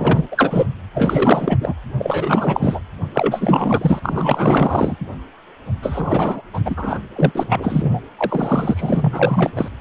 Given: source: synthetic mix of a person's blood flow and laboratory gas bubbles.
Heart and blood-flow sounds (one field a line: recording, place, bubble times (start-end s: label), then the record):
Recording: Doppler ultrasound of blood flow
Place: precordium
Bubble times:
0.00-0.27 s: bubbles
0.31-0.66 s: bubbles
0.94-1.58 s: bubbles
1.60-1.74 s: bubbles
1.98-2.80 s: bubbles
3.14-3.99 s: bubbles
4.02-4.96 s: bubbles
5.82-6.42 s: bubbles
6.53-6.60 s: bubbles
6.64-6.99 s: bubbles
7.15-7.32 s: bubbles
7.35-7.99 s: bubbles
8.17-9.52 s: bubbles
9.55-9.69 s: bubbles
From the record:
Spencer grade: 4 (maximum detectable bubble signal sounding continuously throughout systole and diastole of every cardiac period, and overriding the amplitude of the normal cardiac signals)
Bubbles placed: anywhere in the cardiac cycle